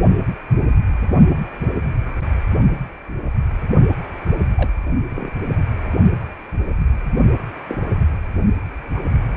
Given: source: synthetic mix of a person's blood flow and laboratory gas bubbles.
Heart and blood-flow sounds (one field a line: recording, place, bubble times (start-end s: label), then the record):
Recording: Doppler ultrasound of blood flow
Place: precordium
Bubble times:
2.05-2.22 s: bubbles
4.56-4.70 s: bubbles
5.10-5.30 s: bubbles
7.68-7.78 s: bubbles
8.95-9.00 s: bubbles
9.35-9.37 s: bubbles
From the record:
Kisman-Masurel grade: 121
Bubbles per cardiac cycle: 1 to 2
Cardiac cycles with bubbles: 10 to 50%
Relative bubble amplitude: barely perceptible (0.100 to 0.250)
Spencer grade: 2 (many but less than half of the cardiac periods contain bubble signals, singularly or in groups)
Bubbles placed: only in the low amplitude regions of the cardiac cycle